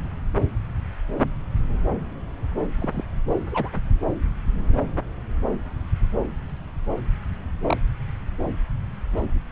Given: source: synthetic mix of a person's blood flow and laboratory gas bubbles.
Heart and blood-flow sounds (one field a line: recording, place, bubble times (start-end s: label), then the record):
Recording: Doppler ultrasound of blood flow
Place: subclavian vein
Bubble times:
2.79-3.03 s: bubbles
3.51-3.69 s: bubbles
7.67-7.78 s: bubbles
From the record:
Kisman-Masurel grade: 121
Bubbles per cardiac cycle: 1 to 2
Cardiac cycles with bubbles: 10 to 50%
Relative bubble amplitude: barely perceptible (0.100 to 0.250)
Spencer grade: 2 (many but less than half of the cardiac periods contain bubble signals, singularly or in groups)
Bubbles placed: anywhere in the cardiac cycle